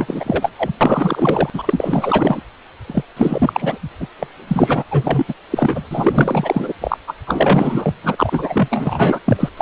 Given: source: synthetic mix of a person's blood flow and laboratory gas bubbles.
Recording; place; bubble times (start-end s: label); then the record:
Doppler ultrasound of blood flow; precordium
0.00-0.52 s: bubbles
0.58-0.70 s: bubbles
0.80-1.50 s: bubbles
1.54-2.42 s: bubbles
2.87-3.02 s: bubbles
3.17-3.78 s: bubbles
4.00-4.08 s: bubbles
4.19-4.26 s: bubbles
4.47-4.83 s: bubbles
4.91-5.33 s: bubbles
5.50-5.85 s: bubbles
5.91-6.73 s: bubbles
6.80-6.97 s: bubbles
7.07-7.14 s: bubbles
7.26-7.95 s: bubbles
8.04-9.21 s: bubbles
9.25-9.49 s: bubbles
9.57-9.62 s: bubbles
From the record:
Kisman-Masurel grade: 444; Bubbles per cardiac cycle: continuous sound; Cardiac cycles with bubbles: 100%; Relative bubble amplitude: maximal (0.775 to 0.999); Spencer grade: 4 (maximum detectable bubble signal sounding continuously throughout systole and diastole of every cardiac period, and overriding the amplitude of the normal cardiac signals); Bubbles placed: anywhere in the cardiac cycle